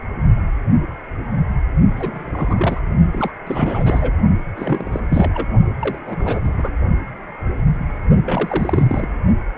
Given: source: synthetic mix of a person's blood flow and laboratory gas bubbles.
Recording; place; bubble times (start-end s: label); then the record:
Doppler ultrasound of blood flow; precordium
1.96-2.80 s: bubbles
3.12-3.31 s: bubbles
3.46-4.16 s: bubbles
4.57-5.00 s: bubbles
5.10-5.47 s: bubbles
5.81-5.99 s: bubbles
6.06-6.40 s: bubbles
6.43-6.71 s: bubbles
8.25-9.10 s: bubbles
From the record:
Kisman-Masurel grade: 332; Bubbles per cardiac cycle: rolling drumbeat, 9 or more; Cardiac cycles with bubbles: 50 to 99%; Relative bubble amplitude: moderate (0.250 to 0.450); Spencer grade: 3 (all of the cardiac periods contain showers or single bubble signals, but not dominating or overriding the cardiac motion signals); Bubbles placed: only in the low amplitude regions of the cardiac cycle